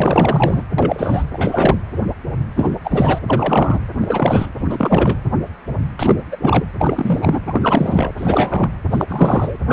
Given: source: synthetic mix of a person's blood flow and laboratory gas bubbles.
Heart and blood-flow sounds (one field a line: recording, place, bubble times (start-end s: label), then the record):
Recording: Doppler ultrasound of blood flow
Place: precordium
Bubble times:
0.00-0.63 s: bubbles
0.78-1.24 s: bubbles
1.31-1.79 s: bubbles
2.55-2.70 s: bubbles
2.83-3.19 s: bubbles
3.26-3.80 s: bubbles
3.99-4.50 s: bubbles
4.69-5.17 s: bubbles
5.99-6.22 s: bubbles
6.31-6.37 s: bubbles
6.41-6.65 s: bubbles
6.79-7.40 s: bubbles
7.46-8.12 s: bubbles
8.17-8.71 s: bubbles
8.91-9.56 s: bubbles
9.67-9.73 s: bubbles
From the record:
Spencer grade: 3 (all of the cardiac periods contain showers or single bubble signals, but not dominating or overriding the cardiac motion signals)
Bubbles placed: anywhere in the cardiac cycle